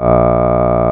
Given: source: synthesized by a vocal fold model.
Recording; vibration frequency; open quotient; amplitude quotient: sustained vowel; 60 Hz; 0.3; 1.2